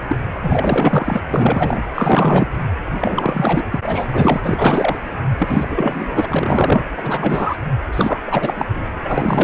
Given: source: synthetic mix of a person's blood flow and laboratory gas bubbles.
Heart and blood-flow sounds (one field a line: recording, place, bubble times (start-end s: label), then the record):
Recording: Doppler ultrasound of blood flow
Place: precordium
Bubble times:
0.09-0.18 s: bubbles
0.35-1.20 s: bubbles
1.30-1.84 s: bubbles
1.94-2.52 s: bubbles
3.00-3.79 s: bubbles
3.83-4.40 s: bubbles
4.44-5.03 s: bubbles
5.38-5.67 s: bubbles
5.70-6.26 s: bubbles
6.29-6.83 s: bubbles
6.97-7.58 s: bubbles
7.92-8.20 s: bubbles
8.27-8.66 s: bubbles
8.70-9.01 s: bubbles
9.03-9.44 s: bubbles
From the record:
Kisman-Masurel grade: 444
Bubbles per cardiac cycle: continuous sound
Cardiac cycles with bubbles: 100%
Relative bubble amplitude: maximal (0.775 to 0.999)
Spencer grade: 4 (maximum detectable bubble signal sounding continuously throughout systole and diastole of every cardiac period, and overriding the amplitude of the normal cardiac signals)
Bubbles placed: anywhere in the cardiac cycle